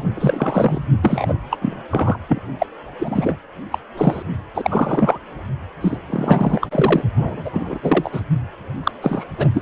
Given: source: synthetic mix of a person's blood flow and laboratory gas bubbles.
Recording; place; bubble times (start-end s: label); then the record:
Doppler ultrasound of blood flow; precordium
0.00-0.04 s: bubbles
0.15-0.84 s: bubbles
1.02-1.34 s: bubbles
1.50-1.83 s: bubbles
1.91-2.18 s: bubbles
2.28-2.42 s: bubbles
2.59-2.67 s: bubbles
2.99-3.38 s: bubbles
3.71-3.79 s: bubbles
3.97-4.23 s: bubbles
4.54-5.19 s: bubbles
5.81-5.98 s: bubbles
6.09-6.68 s: bubbles
6.71-7.03 s: bubbles
7.16-7.79 s: bubbles
7.82-8.21 s: bubbles
8.83-8.91 s: bubbles
9.01-9.25 s: bubbles
9.38-9.48 s: bubbles
9.53-9.62 s: bubbles
From the record:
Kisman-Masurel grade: 343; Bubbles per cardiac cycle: rolling drumbeat, 9 or more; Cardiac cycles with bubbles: 100%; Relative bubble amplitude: loud (0.450 to 0.775); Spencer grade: 3 (all of the cardiac periods contain showers or single bubble signals, but not dominating or overriding the cardiac motion signals); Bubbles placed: only in the low amplitude regions of the cardiac cycle